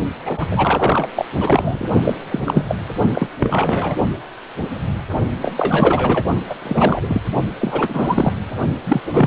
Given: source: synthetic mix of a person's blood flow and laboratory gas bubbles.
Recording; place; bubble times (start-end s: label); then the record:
Doppler ultrasound of blood flow; precordium
0.25-0.48 s: bubbles
0.51-1.08 s: bubbles
1.15-1.25 s: bubbles
1.40-1.88 s: bubbles
2.03-2.14 s: bubbles
2.29-2.78 s: bubbles
3.13-3.27 s: bubbles
3.39-3.96 s: bubbles
5.42-5.54 s: bubbles
5.57-6.25 s: bubbles
6.49-6.54 s: bubbles
6.62-7.21 s: bubbles
7.58-8.34 s: bubbles
8.86-9.01 s: bubbles
9.11-9.27 s: bubbles
From the record:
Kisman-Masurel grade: 333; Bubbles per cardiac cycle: rolling drumbeat, 9 or more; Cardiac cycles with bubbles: 50 to 99%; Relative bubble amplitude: loud (0.450 to 0.775); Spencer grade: 3 (all of the cardiac periods contain showers or single bubble signals, but not dominating or overriding the cardiac motion signals); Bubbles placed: only in the low amplitude regions of the cardiac cycle